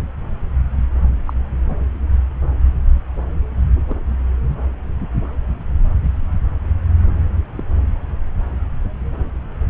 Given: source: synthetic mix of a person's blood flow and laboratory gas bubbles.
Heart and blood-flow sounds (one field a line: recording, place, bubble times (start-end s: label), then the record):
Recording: Doppler ultrasound of blood flow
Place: subclavian vein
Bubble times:
0.00-0.02 s: bubbles
1.26-1.33 s: bubbles
1.70-1.76 s: bubbles
3.89-4.00 s: bubbles
7.55-7.63 s: bubbles
From the record:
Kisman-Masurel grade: 121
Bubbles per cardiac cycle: 1 to 2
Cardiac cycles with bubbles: 10 to 50%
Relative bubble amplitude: barely perceptible (0.100 to 0.250)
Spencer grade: 2 (many but less than half of the cardiac periods contain bubble signals, singularly or in groups)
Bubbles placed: anywhere in the cardiac cycle